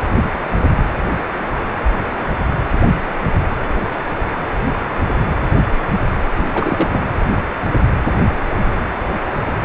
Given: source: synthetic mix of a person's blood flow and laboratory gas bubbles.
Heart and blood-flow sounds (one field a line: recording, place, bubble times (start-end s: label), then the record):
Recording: Doppler ultrasound of blood flow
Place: precordium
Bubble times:
6.38-6.46 s: bubbles
6.51-7.04 s: bubbles
From the record:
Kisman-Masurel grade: 212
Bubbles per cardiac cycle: several, 3 to 8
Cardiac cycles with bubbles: 1 to 10%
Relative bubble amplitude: moderate (0.250 to 0.450)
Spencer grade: 1 (occasional bubble signal discernible with the cardiac motion signal, with majority of cardiac periods free of bubbles)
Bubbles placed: anywhere in the cardiac cycle